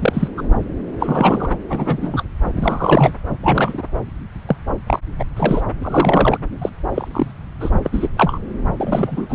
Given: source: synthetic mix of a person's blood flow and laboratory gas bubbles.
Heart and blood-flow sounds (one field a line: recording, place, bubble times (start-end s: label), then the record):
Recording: Doppler ultrasound of blood flow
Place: subclavian vein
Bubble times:
0.00-0.28 s: bubbles
0.37-0.42 s: bubbles
0.99-1.55 s: bubbles
1.69-2.23 s: bubbles
2.56-3.13 s: bubbles
3.43-3.82 s: bubbles
4.47-4.56 s: bubbles
4.86-4.99 s: bubbles
5.19-5.24 s: bubbles
5.36-5.62 s: bubbles
5.82-6.38 s: bubbles
6.61-6.69 s: bubbles
6.94-7.32 s: bubbles
7.60-7.70 s: bubbles
7.85-8.08 s: bubbles
8.17-8.38 s: bubbles
8.77-9.35 s: bubbles
From the record:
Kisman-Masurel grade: 243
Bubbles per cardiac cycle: several, 3 to 8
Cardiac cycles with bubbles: 100%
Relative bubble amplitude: loud (0.450 to 0.775)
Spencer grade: 3 (all of the cardiac periods contain showers or single bubble signals, but not dominating or overriding the cardiac motion signals)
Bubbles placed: anywhere in the cardiac cycle